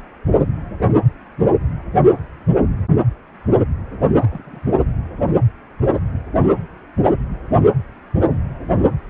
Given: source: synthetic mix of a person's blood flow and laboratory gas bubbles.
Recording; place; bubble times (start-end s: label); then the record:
Doppler ultrasound of blood flow; precordium
4.20-4.59 s: bubbles
From the record:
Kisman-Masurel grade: 111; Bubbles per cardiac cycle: 1 to 2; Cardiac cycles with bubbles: 1 to 10%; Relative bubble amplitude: barely perceptible (0.100 to 0.250); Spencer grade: 1 (occasional bubble signal discernible with the cardiac motion signal, with majority of cardiac periods free of bubbles); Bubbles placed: anywhere in the cardiac cycle